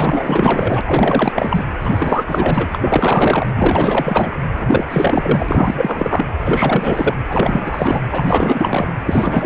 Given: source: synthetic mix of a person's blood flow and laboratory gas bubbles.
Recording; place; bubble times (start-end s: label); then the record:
Doppler ultrasound of blood flow; precordium
0.00-0.81 s: bubbles
0.85-1.65 s: bubbles
1.80-2.69 s: bubbles
2.71-3.49 s: bubbles
3.54-4.32 s: bubbles
4.53-4.86 s: bubbles
4.90-6.25 s: bubbles
6.44-7.14 s: bubbles
7.29-8.01 s: bubbles
8.11-8.91 s: bubbles
9.05-9.46 s: bubbles
From the record:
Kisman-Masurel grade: 444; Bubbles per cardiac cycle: continuous sound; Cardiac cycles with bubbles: 100%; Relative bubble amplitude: maximal (0.775 to 0.999); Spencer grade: 4 (maximum detectable bubble signal sounding continuously throughout systole and diastole of every cardiac period, and overriding the amplitude of the normal cardiac signals); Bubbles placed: anywhere in the cardiac cycle